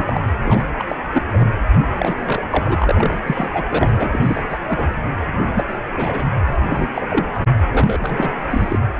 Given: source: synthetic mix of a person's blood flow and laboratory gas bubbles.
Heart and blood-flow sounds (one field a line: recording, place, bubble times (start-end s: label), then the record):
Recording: Doppler ultrasound of blood flow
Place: precordium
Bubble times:
0.00-0.22 s: bubbles
0.46-0.64 s: bubbles
0.79-0.83 s: bubbles
0.89-0.96 s: bubbles
1.12-1.22 s: bubbles
1.32-1.46 s: bubbles
1.99-2.14 s: bubbles
2.25-2.41 s: bubbles
2.50-3.21 s: bubbles
3.27-3.48 s: bubbles
3.53-3.65 s: bubbles
3.69-3.91 s: bubbles
3.97-4.09 s: bubbles
4.12-4.18 s: bubbles
4.22-4.43 s: bubbles
4.49-4.58 s: bubbles
4.67-4.90 s: bubbles
5.26-5.65 s: bubbles
5.93-6.26 s: bubbles
6.47-6.54 s: bubbles
6.62-7.25 s: bubbles
7.72-8.33 s: bubbles
8.50-8.78 s: bubbles
From the record:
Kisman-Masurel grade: 242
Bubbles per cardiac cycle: several, 3 to 8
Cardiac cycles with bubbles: 100%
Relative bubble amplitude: moderate (0.250 to 0.450)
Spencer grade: 3 (all of the cardiac periods contain showers or single bubble signals, but not dominating or overriding the cardiac motion signals)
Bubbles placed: anywhere in the cardiac cycle